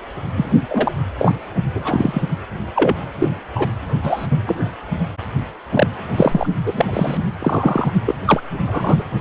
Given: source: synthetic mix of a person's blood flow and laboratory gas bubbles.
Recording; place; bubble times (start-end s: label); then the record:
Doppler ultrasound of blood flow; precordium
0.36-0.46 s: bubbles
0.68-0.92 s: bubbles
1.18-1.32 s: bubbles
1.74-2.25 s: bubbles
2.75-2.94 s: bubbles
3.18-3.29 s: bubbles
3.55-3.68 s: bubbles
4.02-4.27 s: bubbles
4.30-4.38 s: bubbles
4.46-4.68 s: bubbles
5.71-5.87 s: bubbles
6.16-6.46 s: bubbles
6.65-7.17 s: bubbles
7.39-7.90 s: bubbles
8.06-8.15 s: bubbles
8.25-8.41 s: bubbles
8.66-9.03 s: bubbles
From the record:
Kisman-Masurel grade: 243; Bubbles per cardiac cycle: several, 3 to 8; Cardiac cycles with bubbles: 100%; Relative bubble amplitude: loud (0.450 to 0.775); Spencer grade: 3 (all of the cardiac periods contain showers or single bubble signals, but not dominating or overriding the cardiac motion signals); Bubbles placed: only in the low amplitude regions of the cardiac cycle